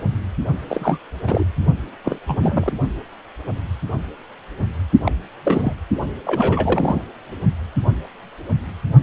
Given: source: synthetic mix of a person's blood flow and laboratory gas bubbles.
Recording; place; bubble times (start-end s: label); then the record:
Doppler ultrasound of blood flow; precordium
0.69-1.00 s: bubbles
1.27-1.44 s: bubbles
2.04-2.19 s: bubbles
2.27-2.73 s: bubbles
5.04-5.12 s: bubbles
5.45-5.73 s: bubbles
6.25-7.02 s: bubbles
From the record:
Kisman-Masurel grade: 232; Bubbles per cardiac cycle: several, 3 to 8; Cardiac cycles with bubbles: 50 to 99%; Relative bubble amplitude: moderate (0.250 to 0.450); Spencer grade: 3 (all of the cardiac periods contain showers or single bubble signals, but not dominating or overriding the cardiac motion signals); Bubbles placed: only in the low amplitude regions of the cardiac cycle